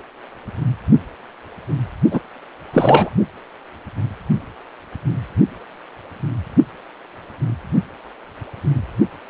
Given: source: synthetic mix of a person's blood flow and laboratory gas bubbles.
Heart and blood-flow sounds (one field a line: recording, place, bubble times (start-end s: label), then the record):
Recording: Doppler ultrasound of blood flow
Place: precordium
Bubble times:
2.11-2.20 s: bubbles
2.71-3.10 s: bubbles
From the record:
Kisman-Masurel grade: 213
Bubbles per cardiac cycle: several, 3 to 8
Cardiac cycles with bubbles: 1 to 10%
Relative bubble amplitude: loud (0.450 to 0.775)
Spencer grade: 1 (occasional bubble signal discernible with the cardiac motion signal, with majority of cardiac periods free of bubbles)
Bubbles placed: only in the low amplitude regions of the cardiac cycle